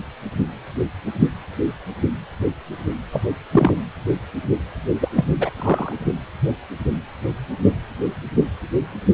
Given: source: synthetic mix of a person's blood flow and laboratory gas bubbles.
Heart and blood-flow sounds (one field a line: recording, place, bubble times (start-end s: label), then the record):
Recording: Doppler ultrasound of blood flow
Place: precordium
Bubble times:
3.11-3.21 s: bubbles
3.52-3.77 s: bubbles
5.01-5.09 s: bubbles
5.15-5.26 s: bubbles
5.39-5.49 s: bubbles
5.58-5.93 s: bubbles
From the record:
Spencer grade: 2 (many but less than half of the cardiac periods contain bubble signals, singularly or in groups)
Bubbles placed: anywhere in the cardiac cycle